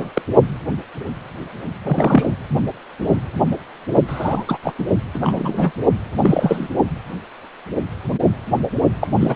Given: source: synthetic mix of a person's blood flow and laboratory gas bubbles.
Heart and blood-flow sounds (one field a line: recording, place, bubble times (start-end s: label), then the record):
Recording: Doppler ultrasound of blood flow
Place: precordium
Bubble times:
0.00-0.10 s: bubbles
0.14-0.22 s: bubbles
1.83-2.34 s: bubbles
4.08-4.45 s: bubbles
4.47-4.58 s: bubbles
4.63-4.74 s: bubbles
4.79-4.84 s: bubbles
5.14-5.19 s: bubbles
5.22-5.71 s: bubbles
6.22-6.68 s: bubbles
9.01-9.07 s: bubbles
9.19-9.36 s: bubbles
From the record:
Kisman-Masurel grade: 233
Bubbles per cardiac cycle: several, 3 to 8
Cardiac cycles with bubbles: 50 to 99%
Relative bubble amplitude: loud (0.450 to 0.775)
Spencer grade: 3 (all of the cardiac periods contain showers or single bubble signals, but not dominating or overriding the cardiac motion signals)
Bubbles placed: only in the low amplitude regions of the cardiac cycle